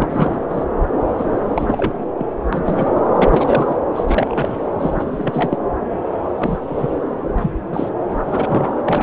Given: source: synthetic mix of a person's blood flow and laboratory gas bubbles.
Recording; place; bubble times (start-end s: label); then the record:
Doppler ultrasound of blood flow; subclavian vein
0.00-0.47 s: bubbles
0.49-0.64 s: bubbles
1.18-1.26 s: bubbles
1.50-1.98 s: bubbles
2.16-2.26 s: bubbles
2.52-2.90 s: bubbles
2.96-3.00 s: bubbles
3.12-3.77 s: bubbles
3.94-4.56 s: bubbles
4.79-5.04 s: bubbles
5.12-5.58 s: bubbles
6.38-6.58 s: bubbles
6.67-6.89 s: bubbles
7.38-7.51 s: bubbles
7.71-7.89 s: bubbles
8.27-8.77 s: bubbles
8.86-9.02 s: bubbles
From the record:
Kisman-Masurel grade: 242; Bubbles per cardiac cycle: several, 3 to 8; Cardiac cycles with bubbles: 100%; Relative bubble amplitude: moderate (0.250 to 0.450); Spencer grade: 3 (all of the cardiac periods contain showers or single bubble signals, but not dominating or overriding the cardiac motion signals); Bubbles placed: anywhere in the cardiac cycle